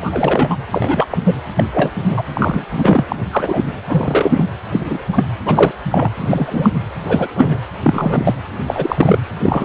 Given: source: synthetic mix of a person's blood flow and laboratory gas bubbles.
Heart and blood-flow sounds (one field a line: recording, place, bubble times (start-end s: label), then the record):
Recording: Doppler ultrasound of blood flow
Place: precordium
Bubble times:
0.00-0.57 s: bubbles
0.71-1.05 s: bubbles
1.10-1.18 s: bubbles
1.26-1.32 s: bubbles
1.55-1.64 s: bubbles
1.72-1.91 s: bubbles
2.11-2.22 s: bubbles
2.34-2.66 s: bubbles
2.71-3.04 s: bubbles
3.08-3.16 s: bubbles
3.31-3.62 s: bubbles
3.88-4.45 s: bubbles
4.71-4.98 s: bubbles
5.12-5.25 s: bubbles
5.44-5.71 s: bubbles
5.91-6.10 s: bubbles
6.18-6.70 s: bubbles
7.03-7.28 s: bubbles
7.35-7.59 s: bubbles
7.83-8.35 s: bubbles
8.67-9.19 s: bubbles
9.43-9.65 s: bubbles
From the record:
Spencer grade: 3 (all of the cardiac periods contain showers or single bubble signals, but not dominating or overriding the cardiac motion signals)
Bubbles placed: anywhere in the cardiac cycle